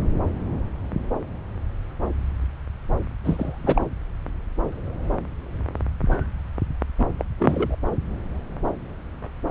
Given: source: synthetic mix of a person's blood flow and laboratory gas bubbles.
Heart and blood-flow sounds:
Doppler ultrasound of blood flow; subclavian vein
3.24-3.82 s: bubbles
6.98-7.05 s: bubbles
7.18-7.25 s: bubbles
7.38-7.76 s: bubbles
From the record:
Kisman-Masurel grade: 212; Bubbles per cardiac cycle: several, 3 to 8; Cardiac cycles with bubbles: 1 to 10%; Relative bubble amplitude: moderate (0.250 to 0.450); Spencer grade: 1 (occasional bubble signal discernible with the cardiac motion signal, with majority of cardiac periods free of bubbles); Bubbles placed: anywhere in the cardiac cycle

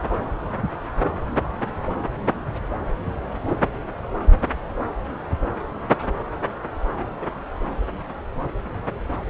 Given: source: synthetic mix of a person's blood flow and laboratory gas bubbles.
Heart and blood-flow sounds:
Doppler ultrasound of blood flow; subclavian vein
no bubbles
From the record:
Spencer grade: 0 (complete lack of bubble signals)

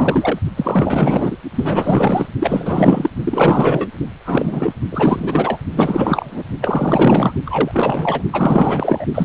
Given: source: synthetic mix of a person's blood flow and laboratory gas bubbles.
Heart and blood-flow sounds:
Doppler ultrasound of blood flow; precordium
0.00-0.39 s: bubbles
0.56-1.38 s: bubbles
1.55-2.29 s: bubbles
2.39-3.10 s: bubbles
3.23-3.88 s: bubbles
4.25-4.73 s: bubbles
4.91-5.59 s: bubbles
5.74-6.44 s: bubbles
6.61-7.33 s: bubbles
7.45-8.23 s: bubbles
8.32-9.06 s: bubbles
9.14-9.25 s: bubbles
From the record:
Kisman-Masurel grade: 444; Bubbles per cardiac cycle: continuous sound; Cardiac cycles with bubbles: 100%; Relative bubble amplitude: maximal (0.775 to 0.999); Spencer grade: 4 (maximum detectable bubble signal sounding continuously throughout systole and diastole of every cardiac period, and overriding the amplitude of the normal cardiac signals); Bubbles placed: only in the low amplitude regions of the cardiac cycle

